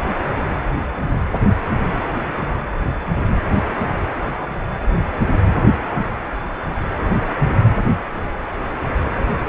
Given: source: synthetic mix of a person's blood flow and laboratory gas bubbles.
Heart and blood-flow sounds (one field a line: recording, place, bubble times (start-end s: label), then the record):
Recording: Doppler ultrasound of blood flow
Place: precordium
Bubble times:
no bubbles
From the record:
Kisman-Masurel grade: 000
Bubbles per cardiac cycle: 0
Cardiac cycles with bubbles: 0%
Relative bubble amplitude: no bubbles discernible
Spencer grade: 0 (complete lack of bubble signals)